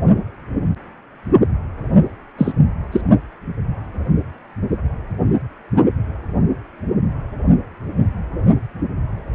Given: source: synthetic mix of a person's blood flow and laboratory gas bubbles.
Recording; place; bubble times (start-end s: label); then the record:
Doppler ultrasound of blood flow; precordium
2.38-2.52 s: bubbles
2.92-3.01 s: bubbles
From the record:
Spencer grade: 1 (occasional bubble signal discernible with the cardiac motion signal, with majority of cardiac periods free of bubbles); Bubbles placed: only in the low amplitude regions of the cardiac cycle